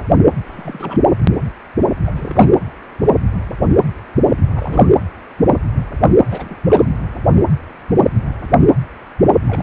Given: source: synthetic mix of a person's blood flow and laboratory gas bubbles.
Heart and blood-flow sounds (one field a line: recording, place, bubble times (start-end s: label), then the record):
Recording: Doppler ultrasound of blood flow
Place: precordium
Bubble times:
0.45-0.99 s: bubbles
2.06-2.50 s: bubbles
4.54-4.91 s: bubbles
6.30-6.56 s: bubbles
6.63-6.88 s: bubbles
9.46-9.63 s: bubbles
From the record:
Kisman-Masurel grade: 221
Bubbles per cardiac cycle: several, 3 to 8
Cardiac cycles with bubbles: 10 to 50%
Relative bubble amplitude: barely perceptible (0.100 to 0.250)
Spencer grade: 2 (many but less than half of the cardiac periods contain bubble signals, singularly or in groups)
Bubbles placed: anywhere in the cardiac cycle